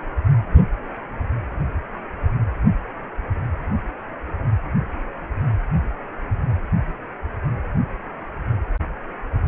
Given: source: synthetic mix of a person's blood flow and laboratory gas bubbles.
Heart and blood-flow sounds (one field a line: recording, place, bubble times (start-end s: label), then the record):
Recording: Doppler ultrasound of blood flow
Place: precordium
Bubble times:
no bubbles
From the record:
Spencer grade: 0 (complete lack of bubble signals)